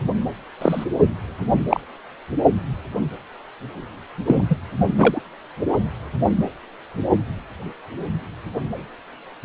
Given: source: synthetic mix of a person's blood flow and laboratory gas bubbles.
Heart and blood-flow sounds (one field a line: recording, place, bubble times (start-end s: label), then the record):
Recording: Doppler ultrasound of blood flow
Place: precordium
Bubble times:
0.61-0.84 s: bubbles
1.70-1.80 s: bubbles
4.25-4.46 s: bubbles
4.49-4.56 s: bubbles
4.98-5.20 s: bubbles
From the record:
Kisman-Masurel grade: 123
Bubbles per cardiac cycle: 1 to 2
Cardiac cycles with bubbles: 10 to 50%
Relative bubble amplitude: loud (0.450 to 0.775)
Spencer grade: 2 (many but less than half of the cardiac periods contain bubble signals, singularly or in groups)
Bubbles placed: anywhere in the cardiac cycle